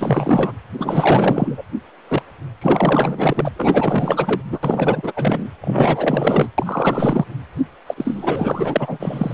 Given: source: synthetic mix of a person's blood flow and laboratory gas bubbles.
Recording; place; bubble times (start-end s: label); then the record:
Doppler ultrasound of blood flow; precordium
0.00-0.52 s: bubbles
0.78-1.64 s: bubbles
2.08-2.22 s: bubbles
2.61-3.49 s: bubbles
3.56-4.41 s: bubbles
4.44-4.58 s: bubbles
4.62-5.12 s: bubbles
5.16-5.50 s: bubbles
5.61-6.50 s: bubbles
6.58-7.25 s: bubbles
7.86-9.34 s: bubbles
From the record:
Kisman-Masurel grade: 444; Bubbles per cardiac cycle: continuous sound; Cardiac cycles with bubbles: 100%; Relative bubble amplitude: maximal (0.775 to 0.999); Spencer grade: 4 (maximum detectable bubble signal sounding continuously throughout systole and diastole of every cardiac period, and overriding the amplitude of the normal cardiac signals); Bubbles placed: anywhere in the cardiac cycle